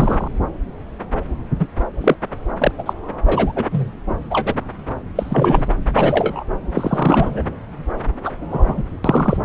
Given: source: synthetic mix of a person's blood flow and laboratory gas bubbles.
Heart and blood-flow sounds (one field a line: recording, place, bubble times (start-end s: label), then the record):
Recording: Doppler ultrasound of blood flow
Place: subclavian vein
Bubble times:
0.00-0.28 s: bubbles
1.58-1.67 s: bubbles
2.00-2.16 s: bubbles
2.58-2.71 s: bubbles
2.78-2.93 s: bubbles
3.26-3.52 s: bubbles
3.55-3.68 s: bubbles
3.71-3.91 s: bubbles
4.31-4.54 s: bubbles
5.15-5.67 s: bubbles
5.94-6.44 s: bubbles
6.74-7.42 s: bubbles
8.24-8.31 s: bubbles
8.51-8.83 s: bubbles
9.04-9.38 s: bubbles
From the record:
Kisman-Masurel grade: 233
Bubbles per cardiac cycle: several, 3 to 8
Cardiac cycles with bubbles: 50 to 99%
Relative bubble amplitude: loud (0.450 to 0.775)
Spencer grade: 3 (all of the cardiac periods contain showers or single bubble signals, but not dominating or overriding the cardiac motion signals)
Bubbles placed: anywhere in the cardiac cycle